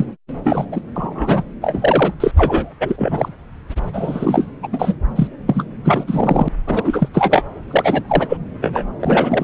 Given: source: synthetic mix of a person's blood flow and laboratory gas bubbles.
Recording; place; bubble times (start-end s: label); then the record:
Doppler ultrasound of blood flow; subclavian vein
0.00-0.07 s: bubbles
0.43-0.66 s: bubbles
0.72-0.82 s: bubbles
0.96-1.43 s: bubbles
1.62-2.12 s: bubbles
2.20-2.31 s: bubbles
2.36-2.73 s: bubbles
2.80-3.32 s: bubbles
3.93-4.47 s: bubbles
4.62-4.67 s: bubbles
4.72-4.98 s: bubbles
5.16-5.27 s: bubbles
5.48-5.64 s: bubbles
5.84-6.04 s: bubbles
6.07-6.49 s: bubbles
6.67-7.08 s: bubbles
7.13-7.45 s: bubbles
7.67-8.04 s: bubbles
8.08-8.38 s: bubbles
8.61-8.83 s: bubbles
9.00-9.44 s: bubbles
From the record:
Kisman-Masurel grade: 343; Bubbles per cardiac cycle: rolling drumbeat, 9 or more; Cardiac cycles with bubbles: 100%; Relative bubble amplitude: loud (0.450 to 0.775); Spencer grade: 3 (all of the cardiac periods contain showers or single bubble signals, but not dominating or overriding the cardiac motion signals); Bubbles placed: anywhere in the cardiac cycle